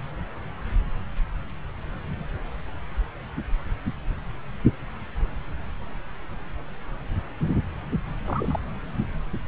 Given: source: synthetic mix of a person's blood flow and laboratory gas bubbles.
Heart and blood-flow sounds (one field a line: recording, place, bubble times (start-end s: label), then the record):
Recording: Doppler ultrasound of blood flow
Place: subclavian vein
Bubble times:
8.25-8.60 s: bubbles
From the record:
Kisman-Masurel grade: 221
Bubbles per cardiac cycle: several, 3 to 8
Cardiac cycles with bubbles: 10 to 50%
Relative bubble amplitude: barely perceptible (0.100 to 0.250)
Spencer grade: 2 (many but less than half of the cardiac periods contain bubble signals, singularly or in groups)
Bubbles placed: anywhere in the cardiac cycle